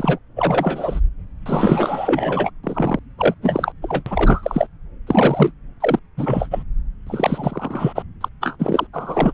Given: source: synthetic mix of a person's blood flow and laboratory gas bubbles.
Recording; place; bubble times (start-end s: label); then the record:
Doppler ultrasound of blood flow; subclavian vein
0.00-0.18 s: bubbles
0.36-1.00 s: bubbles
1.46-2.50 s: bubbles
2.63-2.99 s: bubbles
3.18-3.34 s: bubbles
3.42-3.72 s: bubbles
3.82-4.03 s: bubbles
4.06-4.67 s: bubbles
5.06-5.51 s: bubbles
5.80-5.99 s: bubbles
6.17-6.48 s: bubbles
6.51-6.63 s: bubbles
7.06-8.03 s: bubbles
8.21-8.29 s: bubbles
8.41-8.56 s: bubbles
8.59-8.87 s: bubbles
8.93-9.33 s: bubbles
From the record:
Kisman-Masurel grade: 333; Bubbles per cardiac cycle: rolling drumbeat, 9 or more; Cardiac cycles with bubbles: 50 to 99%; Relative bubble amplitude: loud (0.450 to 0.775); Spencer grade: 3 (all of the cardiac periods contain showers or single bubble signals, but not dominating or overriding the cardiac motion signals); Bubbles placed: anywhere in the cardiac cycle